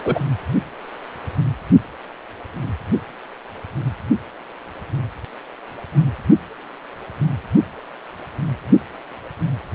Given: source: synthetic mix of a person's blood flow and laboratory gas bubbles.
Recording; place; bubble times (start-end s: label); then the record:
Doppler ultrasound of blood flow; precordium
0.04-0.19 s: bubbles
From the record:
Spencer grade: 1 (occasional bubble signal discernible with the cardiac motion signal, with majority of cardiac periods free of bubbles); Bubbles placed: only in the low amplitude regions of the cardiac cycle